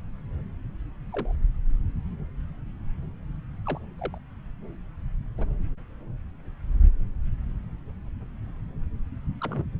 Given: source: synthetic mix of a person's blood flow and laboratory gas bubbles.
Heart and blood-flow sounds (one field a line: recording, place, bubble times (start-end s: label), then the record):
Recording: Doppler ultrasound of blood flow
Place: subclavian vein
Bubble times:
1.12-1.31 s: bubbles
3.66-3.79 s: bubbles
3.99-4.18 s: bubbles
5.38-5.46 s: bubbles
9.41-9.65 s: bubbles
From the record:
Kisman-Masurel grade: 121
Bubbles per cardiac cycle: 1 to 2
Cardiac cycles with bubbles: 10 to 50%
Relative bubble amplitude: barely perceptible (0.100 to 0.250)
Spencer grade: 2 (many but less than half of the cardiac periods contain bubble signals, singularly or in groups)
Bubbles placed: anywhere in the cardiac cycle